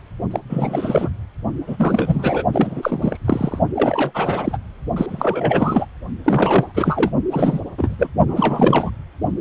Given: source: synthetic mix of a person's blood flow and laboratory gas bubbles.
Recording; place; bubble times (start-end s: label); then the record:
Doppler ultrasound of blood flow; precordium
0.30-0.40 s: bubbles
0.49-1.09 s: bubbles
1.67-2.43 s: bubbles
2.53-3.17 s: bubbles
3.25-3.59 s: bubbles
3.75-4.58 s: bubbles
4.96-5.85 s: bubbles
6.24-7.11 s: bubbles
7.31-7.60 s: bubbles
7.77-8.09 s: bubbles
8.28-8.92 s: bubbles
From the record:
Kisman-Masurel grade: 343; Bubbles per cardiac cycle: rolling drumbeat, 9 or more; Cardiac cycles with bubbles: 100%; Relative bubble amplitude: loud (0.450 to 0.775); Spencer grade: 3 (all of the cardiac periods contain showers or single bubble signals, but not dominating or overriding the cardiac motion signals); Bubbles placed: only in the low amplitude regions of the cardiac cycle